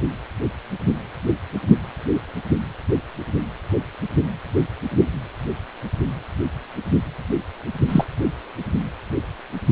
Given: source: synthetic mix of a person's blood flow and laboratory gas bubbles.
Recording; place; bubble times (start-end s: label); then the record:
Doppler ultrasound of blood flow; precordium
7.89-8.04 s: bubbles
From the record:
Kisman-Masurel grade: 123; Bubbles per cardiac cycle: 1 to 2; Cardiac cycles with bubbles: 10 to 50%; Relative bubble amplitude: loud (0.450 to 0.775); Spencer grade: 2 (many but less than half of the cardiac periods contain bubble signals, singularly or in groups); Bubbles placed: only in the low amplitude regions of the cardiac cycle